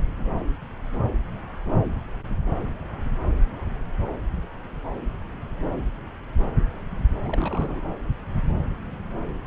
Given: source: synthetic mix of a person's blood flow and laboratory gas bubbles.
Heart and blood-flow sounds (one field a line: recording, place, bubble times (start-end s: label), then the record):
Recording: Doppler ultrasound of blood flow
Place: subclavian vein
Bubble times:
7.25-7.81 s: bubbles
From the record:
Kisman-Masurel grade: 211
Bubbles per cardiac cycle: several, 3 to 8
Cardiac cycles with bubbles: 1 to 10%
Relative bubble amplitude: barely perceptible (0.100 to 0.250)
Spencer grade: 1 (occasional bubble signal discernible with the cardiac motion signal, with majority of cardiac periods free of bubbles)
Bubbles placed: anywhere in the cardiac cycle